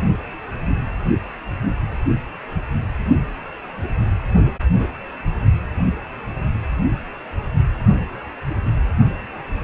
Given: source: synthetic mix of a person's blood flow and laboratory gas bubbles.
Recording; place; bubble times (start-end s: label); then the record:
Doppler ultrasound of blood flow; precordium
no bubbles
From the record:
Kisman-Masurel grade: 000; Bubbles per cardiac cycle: 0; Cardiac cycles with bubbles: 0%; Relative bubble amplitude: no bubbles discernible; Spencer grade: 0 (complete lack of bubble signals)